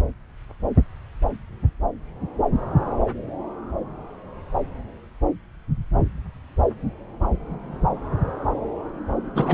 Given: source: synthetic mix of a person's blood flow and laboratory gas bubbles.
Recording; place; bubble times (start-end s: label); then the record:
Doppler ultrasound of blood flow; subclavian vein
9.35-9.54 s: bubbles
From the record:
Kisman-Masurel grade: 212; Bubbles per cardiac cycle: several, 3 to 8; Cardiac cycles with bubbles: 1 to 10%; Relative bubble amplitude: moderate (0.250 to 0.450); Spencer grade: 1 (occasional bubble signal discernible with the cardiac motion signal, with majority of cardiac periods free of bubbles); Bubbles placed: anywhere in the cardiac cycle